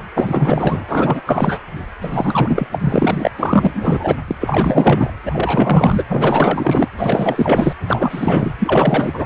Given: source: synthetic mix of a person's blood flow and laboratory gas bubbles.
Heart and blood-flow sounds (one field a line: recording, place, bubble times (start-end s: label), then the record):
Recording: Doppler ultrasound of blood flow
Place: precordium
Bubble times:
0.00-0.02 s: bubbles
0.15-0.84 s: bubbles
0.88-1.22 s: bubbles
1.26-1.60 s: bubbles
2.01-2.67 s: bubbles
2.73-3.31 s: bubbles
3.38-4.15 s: bubbles
4.27-4.36 s: bubbles
4.40-5.11 s: bubbles
5.25-6.04 s: bubbles
6.08-6.88 s: bubbles
6.97-7.73 s: bubbles
7.88-8.54 s: bubbles
8.58-9.26 s: bubbles
From the record:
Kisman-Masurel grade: 444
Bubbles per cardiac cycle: continuous sound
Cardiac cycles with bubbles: 100%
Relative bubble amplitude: maximal (0.775 to 0.999)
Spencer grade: 4 (maximum detectable bubble signal sounding continuously throughout systole and diastole of every cardiac period, and overriding the amplitude of the normal cardiac signals)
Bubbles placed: anywhere in the cardiac cycle